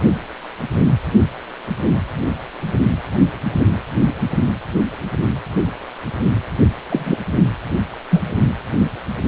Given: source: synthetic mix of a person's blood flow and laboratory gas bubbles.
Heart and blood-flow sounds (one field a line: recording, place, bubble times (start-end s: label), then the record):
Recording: Doppler ultrasound of blood flow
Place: precordium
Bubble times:
6.90-7.17 s: bubbles
8.11-8.22 s: bubbles
From the record:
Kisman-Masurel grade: 123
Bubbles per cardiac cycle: 1 to 2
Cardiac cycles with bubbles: 10 to 50%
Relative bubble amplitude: loud (0.450 to 0.775)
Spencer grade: 2 (many but less than half of the cardiac periods contain bubble signals, singularly or in groups)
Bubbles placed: only in the low amplitude regions of the cardiac cycle